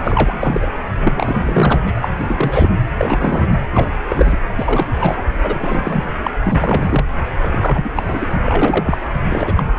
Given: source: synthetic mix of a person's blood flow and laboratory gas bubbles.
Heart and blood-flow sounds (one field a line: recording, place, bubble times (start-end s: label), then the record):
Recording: Doppler ultrasound of blood flow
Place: precordium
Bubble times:
0.03-0.69 s: bubbles
1.04-2.09 s: bubbles
2.20-2.25 s: bubbles
2.28-2.70 s: bubbles
2.97-3.47 s: bubbles
3.72-3.89 s: bubbles
4.09-4.37 s: bubbles
4.56-4.88 s: bubbles
5.00-5.23 s: bubbles
5.43-6.04 s: bubbles
6.24-6.31 s: bubbles
6.44-7.06 s: bubbles
7.43-7.90 s: bubbles
7.94-8.37 s: bubbles
8.43-8.97 s: bubbles
9.29-9.63 s: bubbles
From the record:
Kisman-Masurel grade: 343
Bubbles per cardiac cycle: rolling drumbeat, 9 or more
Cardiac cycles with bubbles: 100%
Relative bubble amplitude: loud (0.450 to 0.775)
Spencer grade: 3 (all of the cardiac periods contain showers or single bubble signals, but not dominating or overriding the cardiac motion signals)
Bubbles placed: anywhere in the cardiac cycle